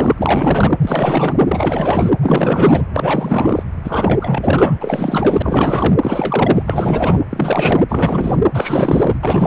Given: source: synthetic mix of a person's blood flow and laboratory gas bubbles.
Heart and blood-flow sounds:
Doppler ultrasound of blood flow; precordium
0.00-0.15 s: bubbles
0.18-0.74 s: bubbles
0.82-1.45 s: bubbles
1.47-2.11 s: bubbles
2.21-2.86 s: bubbles
2.93-3.63 s: bubbles
3.83-5.96 s: bubbles
6.01-6.62 s: bubbles
6.66-7.22 s: bubbles
7.30-7.83 s: bubbles
7.89-8.39 s: bubbles
8.54-9.20 s: bubbles
9.23-9.47 s: bubbles
From the record:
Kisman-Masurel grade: 444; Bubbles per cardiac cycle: continuous sound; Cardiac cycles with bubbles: 100%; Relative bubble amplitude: maximal (0.775 to 0.999); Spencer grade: 4 (maximum detectable bubble signal sounding continuously throughout systole and diastole of every cardiac period, and overriding the amplitude of the normal cardiac signals); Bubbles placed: anywhere in the cardiac cycle

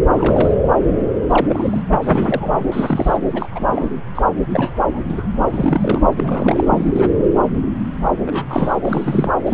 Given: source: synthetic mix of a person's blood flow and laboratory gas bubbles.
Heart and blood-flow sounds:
Doppler ultrasound of blood flow; subclavian vein
0.11-0.56 s: bubbles
1.29-1.46 s: bubbles
1.48-1.82 s: bubbles
2.02-2.65 s: bubbles
2.71-3.17 s: bubbles
3.33-3.90 s: bubbles
4.15-4.23 s: bubbles
4.49-4.99 s: bubbles
5.10-5.26 s: bubbles
5.50-6.01 s: bubbles
6.12-6.66 s: bubbles
6.70-7.10 s: bubbles
8.25-8.79 s: bubbles
8.83-9.32 s: bubbles
9.45-9.54 s: bubbles
From the record:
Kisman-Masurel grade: 232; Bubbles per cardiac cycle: several, 3 to 8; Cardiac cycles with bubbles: 50 to 99%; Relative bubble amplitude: moderate (0.250 to 0.450); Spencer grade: 3 (all of the cardiac periods contain showers or single bubble signals, but not dominating or overriding the cardiac motion signals); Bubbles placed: anywhere in the cardiac cycle

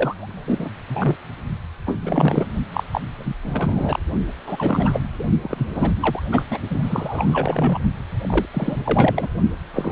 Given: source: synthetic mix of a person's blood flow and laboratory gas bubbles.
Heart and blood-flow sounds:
Doppler ultrasound of blood flow; precordium
0.00-0.69 s: bubbles
0.89-1.16 s: bubbles
1.86-1.98 s: bubbles
2.00-2.54 s: bubbles
2.73-2.83 s: bubbles
2.91-3.01 s: bubbles
3.17-3.33 s: bubbles
3.42-3.99 s: bubbles
4.47-5.01 s: bubbles
5.19-5.24 s: bubbles
5.42-5.92 s: bubbles
6.00-6.22 s: bubbles
6.32-6.43 s: bubbles
6.50-6.58 s: bubbles
6.70-6.80 s: bubbles
6.83-7.78 s: bubbles
8.21-8.46 s: bubbles
8.53-8.81 s: bubbles
8.84-9.26 s: bubbles
9.73-9.92 s: bubbles
From the record:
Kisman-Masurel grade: 342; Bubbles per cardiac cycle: rolling drumbeat, 9 or more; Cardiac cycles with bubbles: 100%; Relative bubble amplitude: moderate (0.250 to 0.450); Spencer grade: 3 (all of the cardiac periods contain showers or single bubble signals, but not dominating or overriding the cardiac motion signals); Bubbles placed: only in the low amplitude regions of the cardiac cycle

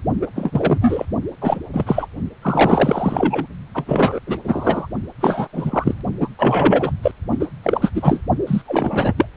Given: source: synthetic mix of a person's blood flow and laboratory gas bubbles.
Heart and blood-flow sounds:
Doppler ultrasound of blood flow; precordium
0.21-0.27 s: bubbles
0.35-1.06 s: bubbles
1.41-1.58 s: bubbles
1.73-2.06 s: bubbles
2.42-3.46 s: bubbles
3.74-4.20 s: bubbles
4.27-4.38 s: bubbles
4.44-4.87 s: bubbles
5.21-5.48 s: bubbles
5.53-5.95 s: bubbles
6.20-6.28 s: bubbles
6.39-6.92 s: bubbles
7.03-7.12 s: bubbles
7.29-7.48 s: bubbles
7.62-7.92 s: bubbles
7.95-8.21 s: bubbles
8.46-8.62 s: bubbles
8.66-9.13 s: bubbles
9.17-9.27 s: bubbles
From the record:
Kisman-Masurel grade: 343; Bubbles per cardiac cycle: rolling drumbeat, 9 or more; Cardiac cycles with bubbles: 100%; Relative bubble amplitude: loud (0.450 to 0.775); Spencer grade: 3 (all of the cardiac periods contain showers or single bubble signals, but not dominating or overriding the cardiac motion signals); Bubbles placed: only in the low amplitude regions of the cardiac cycle

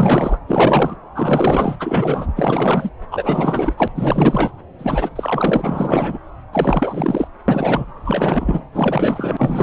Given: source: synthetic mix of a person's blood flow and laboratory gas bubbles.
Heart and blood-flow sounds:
Doppler ultrasound of blood flow; subclavian vein
0.00-0.38 s: bubbles
0.47-0.95 s: bubbles
1.15-1.75 s: bubbles
1.79-2.31 s: bubbles
2.36-2.90 s: bubbles
3.11-3.88 s: bubbles
3.94-4.52 s: bubbles
4.79-5.10 s: bubbles
5.16-6.18 s: bubbles
6.53-7.28 s: bubbles
7.48-7.86 s: bubbles
8.04-8.64 s: bubbles
8.74-9.63 s: bubbles
From the record:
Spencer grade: 4 (maximum detectable bubble signal sounding continuously throughout systole and diastole of every cardiac period, and overriding the amplitude of the normal cardiac signals); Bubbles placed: anywhere in the cardiac cycle

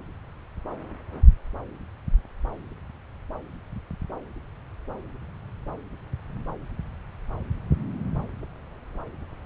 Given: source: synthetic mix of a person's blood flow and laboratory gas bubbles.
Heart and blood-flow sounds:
Doppler ultrasound of blood flow; subclavian vein
no bubbles
From the record:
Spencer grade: 0 (complete lack of bubble signals)

